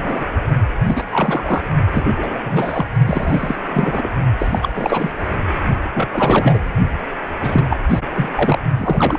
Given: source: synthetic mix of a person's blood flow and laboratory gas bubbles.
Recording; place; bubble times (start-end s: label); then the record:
Doppler ultrasound of blood flow; precordium
0.00-0.27 s: bubbles
0.85-1.04 s: bubbles
1.11-1.62 s: bubbles
1.93-2.12 s: bubbles
2.17-2.85 s: bubbles
3.06-3.56 s: bubbles
3.70-4.08 s: bubbles
4.39-5.12 s: bubbles
5.94-6.08 s: bubbles
6.13-6.59 s: bubbles
7.40-7.67 s: bubbles
7.70-7.77 s: bubbles
7.89-8.00 s: bubbles
8.15-8.29 s: bubbles
8.33-8.61 s: bubbles
8.78-9.19 s: bubbles
From the record:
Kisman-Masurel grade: 343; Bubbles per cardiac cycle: rolling drumbeat, 9 or more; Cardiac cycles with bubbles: 100%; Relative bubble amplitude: loud (0.450 to 0.775); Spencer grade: 3 (all of the cardiac periods contain showers or single bubble signals, but not dominating or overriding the cardiac motion signals); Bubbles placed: only in the low amplitude regions of the cardiac cycle